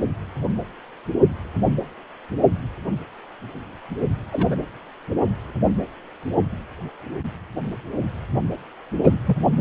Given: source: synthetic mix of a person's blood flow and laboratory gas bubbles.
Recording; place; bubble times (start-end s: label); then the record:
Doppler ultrasound of blood flow; precordium
4.31-4.56 s: bubbles
9.04-9.12 s: bubbles
9.26-9.38 s: bubbles
From the record:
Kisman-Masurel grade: 122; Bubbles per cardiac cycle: 1 to 2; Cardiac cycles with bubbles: 10 to 50%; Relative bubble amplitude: moderate (0.250 to 0.450); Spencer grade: 2 (many but less than half of the cardiac periods contain bubble signals, singularly or in groups); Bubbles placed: only in the low amplitude regions of the cardiac cycle